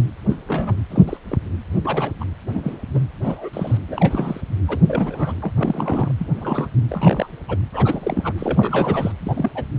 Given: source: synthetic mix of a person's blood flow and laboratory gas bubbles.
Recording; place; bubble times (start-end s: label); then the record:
Doppler ultrasound of blood flow; precordium
0.29-0.35 s: bubbles
0.47-0.77 s: bubbles
0.90-1.03 s: bubbles
1.08-1.17 s: bubbles
1.29-1.38 s: bubbles
1.84-2.12 s: bubbles
2.21-2.24 s: bubbles
2.49-2.79 s: bubbles
2.94-3.00 s: bubbles
3.23-3.49 s: bubbles
3.53-3.77 s: bubbles
3.88-4.41 s: bubbles
4.68-4.79 s: bubbles
4.88-5.33 s: bubbles
5.42-5.52 s: bubbles
5.56-6.12 s: bubbles
6.17-6.27 s: bubbles
6.37-6.68 s: bubbles
6.89-7.27 s: bubbles
7.49-7.56 s: bubbles
7.72-8.33 s: bubbles
8.38-9.12 s: bubbles
9.21-9.51 s: bubbles
9.55-9.64 s: bubbles
From the record:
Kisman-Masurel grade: 242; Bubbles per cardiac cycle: several, 3 to 8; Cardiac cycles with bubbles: 100%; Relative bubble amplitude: moderate (0.250 to 0.450); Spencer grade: 3 (all of the cardiac periods contain showers or single bubble signals, but not dominating or overriding the cardiac motion signals); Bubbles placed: anywhere in the cardiac cycle